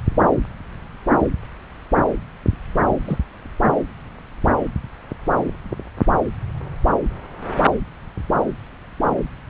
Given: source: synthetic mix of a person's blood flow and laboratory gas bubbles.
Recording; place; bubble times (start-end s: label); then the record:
Doppler ultrasound of blood flow; subclavian vein
3.04-3.18 s: bubbles
From the record:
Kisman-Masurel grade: 111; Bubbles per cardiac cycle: 1 to 2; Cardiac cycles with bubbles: 1 to 10%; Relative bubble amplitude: barely perceptible (0.100 to 0.250); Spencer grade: 1 (occasional bubble signal discernible with the cardiac motion signal, with majority of cardiac periods free of bubbles); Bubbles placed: anywhere in the cardiac cycle